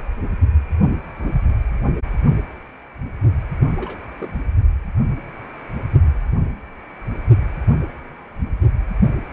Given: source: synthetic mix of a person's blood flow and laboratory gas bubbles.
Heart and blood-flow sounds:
Doppler ultrasound of blood flow; precordium
3.77-3.97 s: bubbles
4.16-4.40 s: bubbles
From the record:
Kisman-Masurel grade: 221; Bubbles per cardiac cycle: several, 3 to 8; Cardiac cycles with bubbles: 10 to 50%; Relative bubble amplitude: barely perceptible (0.100 to 0.250); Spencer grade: 2 (many but less than half of the cardiac periods contain bubble signals, singularly or in groups); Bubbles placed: only in the low amplitude regions of the cardiac cycle

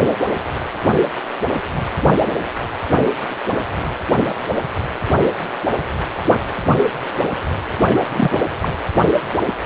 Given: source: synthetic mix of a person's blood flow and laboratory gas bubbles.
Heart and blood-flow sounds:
Doppler ultrasound of blood flow; precordium
7.82-8.05 s: bubbles
8.12-8.38 s: bubbles
8.60-8.70 s: bubbles
From the record:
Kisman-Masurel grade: 222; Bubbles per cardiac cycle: several, 3 to 8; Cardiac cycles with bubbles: 10 to 50%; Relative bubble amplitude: moderate (0.250 to 0.450); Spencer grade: 2 (many but less than half of the cardiac periods contain bubble signals, singularly or in groups); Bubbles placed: anywhere in the cardiac cycle

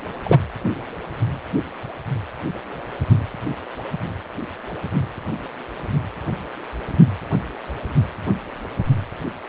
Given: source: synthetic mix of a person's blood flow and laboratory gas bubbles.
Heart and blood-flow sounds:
Doppler ultrasound of blood flow; precordium
0.23-0.39 s: bubbles
From the record:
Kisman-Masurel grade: 113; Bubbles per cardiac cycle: 1 to 2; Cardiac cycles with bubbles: 1 to 10%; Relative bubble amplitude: loud (0.450 to 0.775); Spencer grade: 1 (occasional bubble signal discernible with the cardiac motion signal, with majority of cardiac periods free of bubbles); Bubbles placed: anywhere in the cardiac cycle

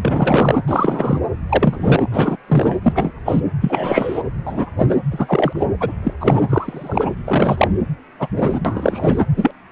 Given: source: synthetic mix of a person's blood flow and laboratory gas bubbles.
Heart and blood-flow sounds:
Doppler ultrasound of blood flow; precordium
0.04-0.59 s: bubbles
0.67-1.19 s: bubbles
1.49-2.06 s: bubbles
2.11-2.36 s: bubbles
2.48-2.78 s: bubbles
2.83-3.13 s: bubbles
3.25-3.42 s: bubbles
3.60-4.23 s: bubbles
4.47-4.67 s: bubbles
4.79-4.97 s: bubbles
5.11-5.67 s: bubbles
5.80-5.92 s: bubbles
6.03-6.14 s: bubbles
6.20-7.14 s: bubbles
7.26-7.68 s: bubbles
8.20-8.28 s: bubbles
8.36-8.60 s: bubbles
8.64-9.19 s: bubbles
9.36-9.52 s: bubbles
From the record:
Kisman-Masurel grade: 243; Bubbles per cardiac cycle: several, 3 to 8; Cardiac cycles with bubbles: 100%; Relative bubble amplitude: loud (0.450 to 0.775); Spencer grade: 3 (all of the cardiac periods contain showers or single bubble signals, but not dominating or overriding the cardiac motion signals); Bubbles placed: anywhere in the cardiac cycle

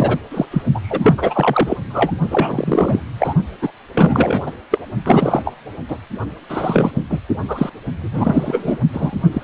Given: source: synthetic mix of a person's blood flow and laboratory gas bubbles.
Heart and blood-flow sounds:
Doppler ultrasound of blood flow; precordium
0.00-0.18 s: bubbles
0.31-0.46 s: bubbles
0.51-0.62 s: bubbles
0.75-0.80 s: bubbles
0.83-1.14 s: bubbles
1.17-1.77 s: bubbles
1.89-2.13 s: bubbles
2.30-3.01 s: bubbles
3.19-3.34 s: bubbles
3.62-3.71 s: bubbles
3.95-4.51 s: bubbles
4.71-4.79 s: bubbles
5.05-5.54 s: bubbles
5.88-5.98 s: bubbles
6.49-6.92 s: bubbles
7.10-7.20 s: bubbles
7.48-7.69 s: bubbles
8.00-8.78 s: bubbles
8.93-9.17 s: bubbles
9.33-9.44 s: bubbles
From the record:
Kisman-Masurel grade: 343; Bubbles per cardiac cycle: rolling drumbeat, 9 or more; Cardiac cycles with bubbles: 100%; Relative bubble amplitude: loud (0.450 to 0.775); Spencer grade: 3 (all of the cardiac periods contain showers or single bubble signals, but not dominating or overriding the cardiac motion signals); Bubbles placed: only in the low amplitude regions of the cardiac cycle

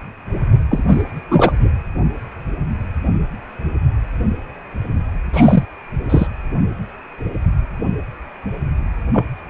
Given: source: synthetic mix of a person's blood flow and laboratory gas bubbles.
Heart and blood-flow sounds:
Doppler ultrasound of blood flow; precordium
0.70-0.85 s: bubbles
0.88-1.02 s: bubbles
1.29-1.52 s: bubbles
1.59-1.69 s: bubbles
5.33-5.64 s: bubbles
6.09-6.27 s: bubbles
9.12-9.25 s: bubbles
From the record:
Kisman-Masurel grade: 223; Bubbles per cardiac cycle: several, 3 to 8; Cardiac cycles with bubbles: 10 to 50%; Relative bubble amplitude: loud (0.450 to 0.775); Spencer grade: 2 (many but less than half of the cardiac periods contain bubble signals, singularly or in groups); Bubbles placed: anywhere in the cardiac cycle

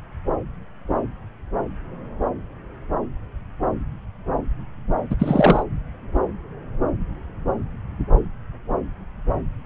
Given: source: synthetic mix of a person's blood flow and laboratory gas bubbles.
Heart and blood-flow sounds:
Doppler ultrasound of blood flow; subclavian vein
5.09-5.16 s: bubbles
5.18-5.62 s: bubbles
From the record:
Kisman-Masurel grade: 213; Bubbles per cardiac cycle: several, 3 to 8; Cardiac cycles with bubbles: 1 to 10%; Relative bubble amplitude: loud (0.450 to 0.775); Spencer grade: 1 (occasional bubble signal discernible with the cardiac motion signal, with majority of cardiac periods free of bubbles); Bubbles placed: anywhere in the cardiac cycle

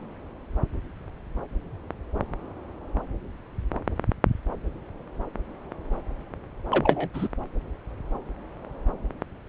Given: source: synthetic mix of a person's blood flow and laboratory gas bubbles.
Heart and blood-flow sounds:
Doppler ultrasound of blood flow; subclavian vein
6.71-7.08 s: bubbles
7.13-7.28 s: bubbles
From the record:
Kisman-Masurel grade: 112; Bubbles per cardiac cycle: 1 to 2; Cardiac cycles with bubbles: 1 to 10%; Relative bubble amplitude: moderate (0.250 to 0.450); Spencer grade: 1 (occasional bubble signal discernible with the cardiac motion signal, with majority of cardiac periods free of bubbles); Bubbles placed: anywhere in the cardiac cycle

